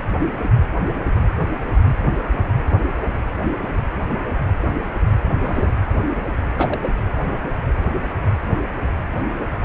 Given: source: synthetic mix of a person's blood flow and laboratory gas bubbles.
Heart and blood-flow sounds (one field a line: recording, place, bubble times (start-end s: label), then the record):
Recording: Doppler ultrasound of blood flow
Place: precordium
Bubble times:
5.42-5.71 s: bubbles
6.55-6.96 s: bubbles
From the record:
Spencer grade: 2 (many but less than half of the cardiac periods contain bubble signals, singularly or in groups)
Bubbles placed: anywhere in the cardiac cycle